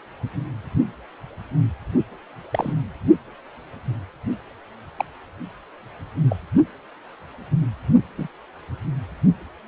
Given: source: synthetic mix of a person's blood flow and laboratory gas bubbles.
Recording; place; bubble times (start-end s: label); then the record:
Doppler ultrasound of blood flow; precordium
2.51-2.73 s: bubbles
4.98-5.04 s: bubbles
6.29-6.36 s: bubbles
8.17-8.28 s: bubbles
From the record:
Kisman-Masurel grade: 122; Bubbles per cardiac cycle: 1 to 2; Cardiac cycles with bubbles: 10 to 50%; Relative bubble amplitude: moderate (0.250 to 0.450); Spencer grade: 2 (many but less than half of the cardiac periods contain bubble signals, singularly or in groups); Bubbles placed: only in the low amplitude regions of the cardiac cycle